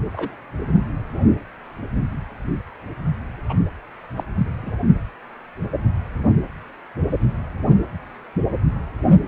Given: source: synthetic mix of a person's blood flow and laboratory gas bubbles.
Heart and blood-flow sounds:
Doppler ultrasound of blood flow; precordium
0.13-0.34 s: bubbles
3.49-3.53 s: bubbles
4.16-4.24 s: bubbles
4.45-4.50 s: bubbles
4.62-4.71 s: bubbles
From the record:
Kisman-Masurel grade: 121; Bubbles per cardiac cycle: 1 to 2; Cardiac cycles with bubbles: 10 to 50%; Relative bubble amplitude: barely perceptible (0.100 to 0.250); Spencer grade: 2 (many but less than half of the cardiac periods contain bubble signals, singularly or in groups); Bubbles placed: anywhere in the cardiac cycle

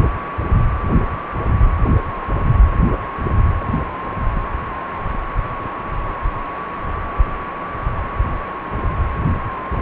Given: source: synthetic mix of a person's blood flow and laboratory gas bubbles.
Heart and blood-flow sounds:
Doppler ultrasound of blood flow; precordium
no bubbles
From the record:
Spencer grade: 0 (complete lack of bubble signals)

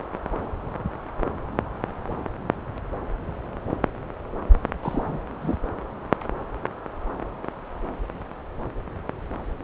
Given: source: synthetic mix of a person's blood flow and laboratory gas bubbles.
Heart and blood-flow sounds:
Doppler ultrasound of blood flow; subclavian vein
4.82-5.21 s: bubbles
5.42-5.58 s: bubbles
From the record:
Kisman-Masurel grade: 212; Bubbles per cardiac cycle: several, 3 to 8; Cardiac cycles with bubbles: 1 to 10%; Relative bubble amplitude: moderate (0.250 to 0.450); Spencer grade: 1 (occasional bubble signal discernible with the cardiac motion signal, with majority of cardiac periods free of bubbles); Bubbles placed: anywhere in the cardiac cycle

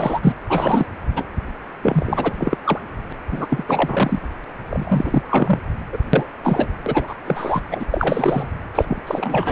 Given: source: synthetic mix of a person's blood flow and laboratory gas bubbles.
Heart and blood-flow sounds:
Doppler ultrasound of blood flow; precordium
0.00-0.36 s: bubbles
0.49-0.86 s: bubbles
1.14-1.24 s: bubbles
1.82-2.34 s: bubbles
2.38-2.56 s: bubbles
2.64-2.79 s: bubbles
3.09-3.12 s: bubbles
3.31-3.46 s: bubbles
3.49-3.64 s: bubbles
3.67-4.22 s: bubbles
4.69-5.22 s: bubbles
5.29-5.59 s: bubbles
5.92-5.98 s: bubbles
6.13-6.25 s: bubbles
6.43-6.67 s: bubbles
6.86-7.15 s: bubbles
7.26-7.62 s: bubbles
7.71-7.86 s: bubbles
7.90-8.52 s: bubbles
8.74-8.85 s: bubbles
8.88-9.02 s: bubbles
9.06-9.52 s: bubbles
From the record:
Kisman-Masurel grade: 333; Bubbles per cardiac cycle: rolling drumbeat, 9 or more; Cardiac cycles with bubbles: 50 to 99%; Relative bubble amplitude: loud (0.450 to 0.775); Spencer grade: 3 (all of the cardiac periods contain showers or single bubble signals, but not dominating or overriding the cardiac motion signals); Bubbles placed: anywhere in the cardiac cycle

